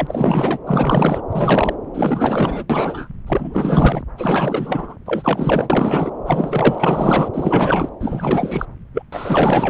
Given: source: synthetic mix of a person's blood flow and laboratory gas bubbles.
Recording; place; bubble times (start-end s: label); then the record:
Doppler ultrasound of blood flow; subclavian vein
0.00-0.58 s: bubbles
0.67-1.22 s: bubbles
1.29-1.74 s: bubbles
1.94-2.63 s: bubbles
2.70-3.08 s: bubbles
3.26-4.02 s: bubbles
4.17-4.96 s: bubbles
5.06-6.11 s: bubbles
6.26-7.29 s: bubbles
7.33-7.89 s: bubbles
8.00-8.66 s: bubbles
8.94-9.03 s: bubbles
9.12-9.70 s: bubbles
From the record:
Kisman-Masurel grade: 444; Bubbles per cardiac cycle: continuous sound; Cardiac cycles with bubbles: 100%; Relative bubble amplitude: maximal (0.775 to 0.999); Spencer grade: 4 (maximum detectable bubble signal sounding continuously throughout systole and diastole of every cardiac period, and overriding the amplitude of the normal cardiac signals); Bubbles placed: anywhere in the cardiac cycle